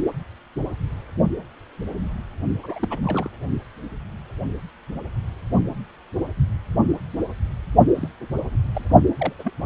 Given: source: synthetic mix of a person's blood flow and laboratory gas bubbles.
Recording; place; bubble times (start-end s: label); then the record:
Doppler ultrasound of blood flow; precordium
2.63-2.99 s: bubbles
3.03-3.29 s: bubbles
7.95-8.09 s: bubbles
8.42-8.56 s: bubbles
8.74-8.85 s: bubbles
9.19-9.33 s: bubbles
9.39-9.53 s: bubbles
From the record:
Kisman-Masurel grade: 221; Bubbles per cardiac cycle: several, 3 to 8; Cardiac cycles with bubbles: 10 to 50%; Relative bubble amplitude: barely perceptible (0.100 to 0.250); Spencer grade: 2 (many but less than half of the cardiac periods contain bubble signals, singularly or in groups); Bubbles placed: only in the low amplitude regions of the cardiac cycle